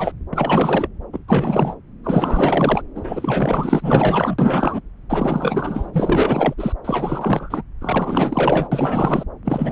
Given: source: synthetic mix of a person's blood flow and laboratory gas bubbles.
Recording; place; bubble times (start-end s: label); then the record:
Doppler ultrasound of blood flow; subclavian vein
0.00-0.12 s: bubbles
0.33-0.88 s: bubbles
1.12-1.19 s: bubbles
1.28-1.76 s: bubbles
2.04-2.82 s: bubbles
2.95-4.81 s: bubbles
5.09-6.54 s: bubbles
6.57-6.72 s: bubbles
6.84-7.62 s: bubbles
7.80-8.69 s: bubbles
8.71-9.24 s: bubbles
9.45-9.72 s: bubbles
From the record:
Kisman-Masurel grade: 444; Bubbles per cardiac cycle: continuous sound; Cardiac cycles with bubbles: 100%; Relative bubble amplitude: maximal (0.775 to 0.999); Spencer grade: 4 (maximum detectable bubble signal sounding continuously throughout systole and diastole of every cardiac period, and overriding the amplitude of the normal cardiac signals); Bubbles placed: anywhere in the cardiac cycle